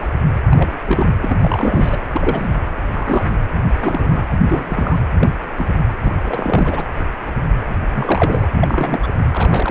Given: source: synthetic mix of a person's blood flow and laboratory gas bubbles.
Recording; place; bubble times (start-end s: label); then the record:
Doppler ultrasound of blood flow; precordium
0.00-0.08 s: bubbles
0.51-1.18 s: bubbles
1.21-1.36 s: bubbles
1.39-1.99 s: bubbles
2.13-2.50 s: bubbles
2.95-3.37 s: bubbles
3.68-4.24 s: bubbles
4.43-4.99 s: bubbles
5.20-5.27 s: bubbles
5.57-5.69 s: bubbles
6.05-6.83 s: bubbles
7.89-8.46 s: bubbles
8.61-9.10 s: bubbles
9.33-9.71 s: bubbles
From the record:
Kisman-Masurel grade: 232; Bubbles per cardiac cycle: several, 3 to 8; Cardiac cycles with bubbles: 50 to 99%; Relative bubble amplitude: moderate (0.250 to 0.450); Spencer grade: 3 (all of the cardiac periods contain showers or single bubble signals, but not dominating or overriding the cardiac motion signals); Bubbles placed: anywhere in the cardiac cycle